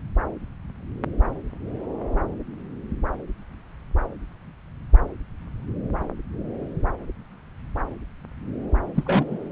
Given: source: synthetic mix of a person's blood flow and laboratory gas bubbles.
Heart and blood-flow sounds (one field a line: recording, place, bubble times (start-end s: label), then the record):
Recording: Doppler ultrasound of blood flow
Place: subclavian vein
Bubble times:
8.94-9.49 s: bubbles
From the record:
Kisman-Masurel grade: 123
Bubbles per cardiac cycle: 1 to 2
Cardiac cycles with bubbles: 10 to 50%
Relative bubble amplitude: loud (0.450 to 0.775)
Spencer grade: 2 (many but less than half of the cardiac periods contain bubble signals, singularly or in groups)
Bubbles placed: anywhere in the cardiac cycle